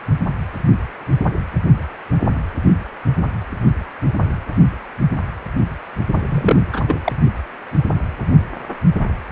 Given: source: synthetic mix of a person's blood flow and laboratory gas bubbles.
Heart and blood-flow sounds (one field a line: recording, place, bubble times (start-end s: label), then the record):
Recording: Doppler ultrasound of blood flow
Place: precordium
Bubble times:
6.13-6.21 s: bubbles
6.29-6.62 s: bubbles
6.72-6.82 s: bubbles
6.88-7.00 s: bubbles
7.04-7.12 s: bubbles
From the record:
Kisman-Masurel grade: 213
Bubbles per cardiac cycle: several, 3 to 8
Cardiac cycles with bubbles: 1 to 10%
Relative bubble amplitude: loud (0.450 to 0.775)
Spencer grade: 1 (occasional bubble signal discernible with the cardiac motion signal, with majority of cardiac periods free of bubbles)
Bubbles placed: only in the low amplitude regions of the cardiac cycle